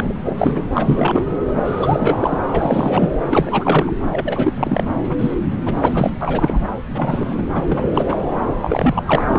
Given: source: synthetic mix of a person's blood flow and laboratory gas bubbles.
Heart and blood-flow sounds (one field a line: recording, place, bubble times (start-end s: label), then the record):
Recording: Doppler ultrasound of blood flow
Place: subclavian vein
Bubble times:
0.00-0.14 s: bubbles
0.24-0.63 s: bubbles
0.72-1.22 s: bubbles
1.64-2.40 s: bubbles
2.54-3.15 s: bubbles
3.30-3.96 s: bubbles
4.06-4.53 s: bubbles
4.58-4.83 s: bubbles
5.09-5.16 s: bubbles
5.19-5.34 s: bubbles
5.66-6.10 s: bubbles
6.21-6.68 s: bubbles
6.94-7.47 s: bubbles
7.54-7.63 s: bubbles
7.68-7.89 s: bubbles
7.94-8.17 s: bubbles
8.62-9.02 s: bubbles
9.05-9.24 s: bubbles
9.28-9.39 s: bubbles
From the record:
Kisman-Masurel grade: 343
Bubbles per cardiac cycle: rolling drumbeat, 9 or more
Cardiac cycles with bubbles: 100%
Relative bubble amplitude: loud (0.450 to 0.775)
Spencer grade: 3 (all of the cardiac periods contain showers or single bubble signals, but not dominating or overriding the cardiac motion signals)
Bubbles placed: anywhere in the cardiac cycle